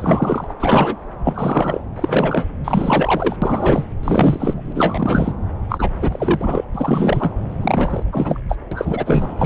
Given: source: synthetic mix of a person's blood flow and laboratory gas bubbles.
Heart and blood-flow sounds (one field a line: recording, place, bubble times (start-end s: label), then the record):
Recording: Doppler ultrasound of blood flow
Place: subclavian vein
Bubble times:
0.00-0.53 s: bubbles
0.60-0.96 s: bubbles
1.24-1.81 s: bubbles
1.96-2.45 s: bubbles
2.64-3.36 s: bubbles
3.42-3.85 s: bubbles
4.03-5.33 s: bubbles
5.69-5.90 s: bubbles
5.94-6.65 s: bubbles
6.75-7.31 s: bubbles
7.62-8.04 s: bubbles
8.12-8.40 s: bubbles
8.49-8.56 s: bubbles
8.71-9.35 s: bubbles
9.38-9.45 s: bubbles
From the record:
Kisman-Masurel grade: 343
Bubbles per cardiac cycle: rolling drumbeat, 9 or more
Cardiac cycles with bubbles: 100%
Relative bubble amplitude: loud (0.450 to 0.775)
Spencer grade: 3 (all of the cardiac periods contain showers or single bubble signals, but not dominating or overriding the cardiac motion signals)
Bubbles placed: anywhere in the cardiac cycle